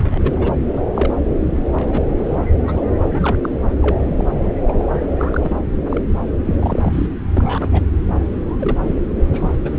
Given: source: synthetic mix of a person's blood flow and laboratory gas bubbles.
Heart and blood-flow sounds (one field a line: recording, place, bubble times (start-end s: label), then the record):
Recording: Doppler ultrasound of blood flow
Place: subclavian vein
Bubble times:
0.00-0.51 s: bubbles
0.77-0.81 s: bubbles
0.94-1.14 s: bubbles
1.71-2.02 s: bubbles
2.18-2.39 s: bubbles
2.67-2.83 s: bubbles
3.09-3.37 s: bubbles
3.42-3.49 s: bubbles
3.82-3.96 s: bubbles
4.16-4.29 s: bubbles
4.68-4.86 s: bubbles
5.18-5.57 s: bubbles
5.89-6.01 s: bubbles
6.45-6.54 s: bubbles
6.59-7.07 s: bubbles
7.34-7.69 s: bubbles
7.72-7.83 s: bubbles
8.59-8.80 s: bubbles
8.83-9.00 s: bubbles
9.32-9.62 s: bubbles
9.64-9.69 s: bubbles
From the record:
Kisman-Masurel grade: 242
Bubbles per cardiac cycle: several, 3 to 8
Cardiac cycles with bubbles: 100%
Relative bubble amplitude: moderate (0.250 to 0.450)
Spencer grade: 3 (all of the cardiac periods contain showers or single bubble signals, but not dominating or overriding the cardiac motion signals)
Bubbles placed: anywhere in the cardiac cycle